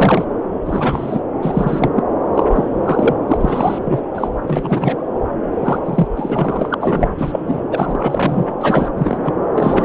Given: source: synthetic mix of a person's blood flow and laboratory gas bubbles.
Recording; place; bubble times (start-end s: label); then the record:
Doppler ultrasound of blood flow; subclavian vein
0.00-0.26 s: bubbles
0.65-1.20 s: bubbles
1.42-1.89 s: bubbles
1.95-2.03 s: bubbles
2.33-2.44 s: bubbles
2.50-3.16 s: bubbles
3.27-3.79 s: bubbles
3.84-4.01 s: bubbles
4.14-4.27 s: bubbles
4.46-5.04 s: bubbles
5.60-5.79 s: bubbles
5.84-6.07 s: bubbles
6.16-6.75 s: bubbles
6.80-7.09 s: bubbles
7.18-7.62 s: bubbles
7.71-8.54 s: bubbles
8.61-8.88 s: bubbles
8.97-9.18 s: bubbles
9.24-9.34 s: bubbles
9.54-9.85 s: bubbles
From the record:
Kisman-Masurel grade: 343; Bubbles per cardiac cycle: rolling drumbeat, 9 or more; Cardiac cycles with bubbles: 100%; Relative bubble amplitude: loud (0.450 to 0.775); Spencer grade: 3 (all of the cardiac periods contain showers or single bubble signals, but not dominating or overriding the cardiac motion signals); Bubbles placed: anywhere in the cardiac cycle